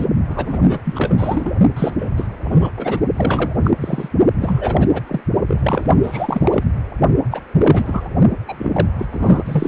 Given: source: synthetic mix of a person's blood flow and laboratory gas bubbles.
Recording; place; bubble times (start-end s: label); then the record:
Doppler ultrasound of blood flow; precordium
0.00-0.05 s: bubbles
0.29-0.78 s: bubbles
0.84-1.51 s: bubbles
1.76-1.93 s: bubbles
1.98-2.12 s: bubbles
2.17-2.28 s: bubbles
2.44-2.69 s: bubbles
2.77-3.00 s: bubbles
3.15-3.61 s: bubbles
3.64-3.71 s: bubbles
3.80-4.09 s: bubbles
4.40-5.01 s: bubbles
5.07-5.21 s: bubbles
5.48-5.86 s: bubbles
6.02-6.63 s: bubbles
7.30-7.42 s: bubbles
7.55-8.09 s: bubbles
8.48-8.87 s: bubbles
8.98-9.08 s: bubbles
9.11-9.68 s: bubbles
From the record:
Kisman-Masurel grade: 343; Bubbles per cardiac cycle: rolling drumbeat, 9 or more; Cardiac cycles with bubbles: 100%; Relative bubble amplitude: loud (0.450 to 0.775); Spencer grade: 3 (all of the cardiac periods contain showers or single bubble signals, but not dominating or overriding the cardiac motion signals); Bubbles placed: only in the low amplitude regions of the cardiac cycle